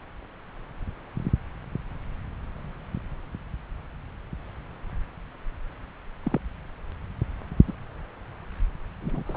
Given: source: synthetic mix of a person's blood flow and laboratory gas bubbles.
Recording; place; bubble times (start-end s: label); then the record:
Doppler ultrasound of blood flow; subclavian vein
6.24-6.40 s: bubbles
7.67-7.73 s: bubbles
9.00-9.37 s: bubbles
From the record:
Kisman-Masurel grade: 122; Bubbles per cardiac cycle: 1 to 2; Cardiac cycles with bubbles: 10 to 50%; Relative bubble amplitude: moderate (0.250 to 0.450); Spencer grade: 2 (many but less than half of the cardiac periods contain bubble signals, singularly or in groups); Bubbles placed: anywhere in the cardiac cycle